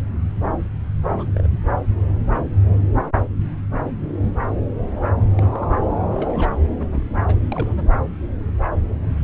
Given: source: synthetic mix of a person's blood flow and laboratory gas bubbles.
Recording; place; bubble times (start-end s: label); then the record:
Doppler ultrasound of blood flow; subclavian vein
1.03-1.31 s: bubbles
1.34-1.47 s: bubbles
5.35-5.65 s: bubbles
5.73-5.84 s: bubbles
6.10-6.50 s: bubbles
6.78-6.87 s: bubbles
6.92-7.01 s: bubbles
7.26-7.35 s: bubbles
7.52-7.91 s: bubbles
From the record:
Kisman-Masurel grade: 221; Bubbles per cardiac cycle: several, 3 to 8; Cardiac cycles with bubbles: 10 to 50%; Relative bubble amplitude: barely perceptible (0.100 to 0.250); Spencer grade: 2 (many but less than half of the cardiac periods contain bubble signals, singularly or in groups); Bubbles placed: anywhere in the cardiac cycle